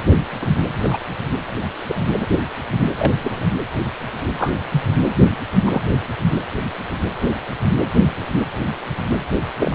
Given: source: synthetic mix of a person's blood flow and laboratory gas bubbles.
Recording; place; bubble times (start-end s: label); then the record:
Doppler ultrasound of blood flow; precordium
0.41-0.46 s: bubbles
0.82-0.97 s: bubbles
1.87-1.96 s: bubbles
2.21-2.25 s: bubbles
2.98-3.13 s: bubbles
3.19-3.49 s: bubbles
4.38-4.53 s: bubbles
4.72-4.83 s: bubbles
5.66-5.82 s: bubbles
9.58-9.75 s: bubbles
From the record:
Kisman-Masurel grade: 122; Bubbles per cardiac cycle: 1 to 2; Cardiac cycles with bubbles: 10 to 50%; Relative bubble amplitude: moderate (0.250 to 0.450); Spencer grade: 2 (many but less than half of the cardiac periods contain bubble signals, singularly or in groups); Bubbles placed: anywhere in the cardiac cycle